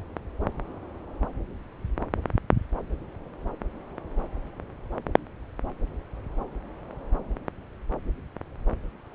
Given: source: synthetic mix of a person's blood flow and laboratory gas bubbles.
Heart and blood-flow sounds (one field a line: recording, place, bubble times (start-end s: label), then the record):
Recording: Doppler ultrasound of blood flow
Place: subclavian vein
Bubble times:
no bubbles
From the record:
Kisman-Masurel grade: 000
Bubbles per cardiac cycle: 0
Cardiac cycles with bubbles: 0%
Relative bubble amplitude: no bubbles discernible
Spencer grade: 0 (complete lack of bubble signals)